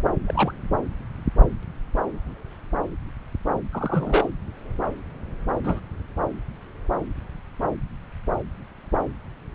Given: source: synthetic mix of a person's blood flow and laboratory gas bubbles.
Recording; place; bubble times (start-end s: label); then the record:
Doppler ultrasound of blood flow; subclavian vein
0.27-0.53 s: bubbles
3.72-4.29 s: bubbles
5.63-5.79 s: bubbles
From the record:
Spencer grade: 2 (many but less than half of the cardiac periods contain bubble signals, singularly or in groups); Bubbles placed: anywhere in the cardiac cycle